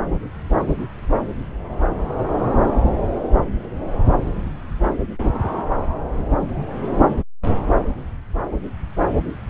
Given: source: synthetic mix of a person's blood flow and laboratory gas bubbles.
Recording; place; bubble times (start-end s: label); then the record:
Doppler ultrasound of blood flow; subclavian vein
no bubbles
From the record:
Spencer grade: 0 (complete lack of bubble signals)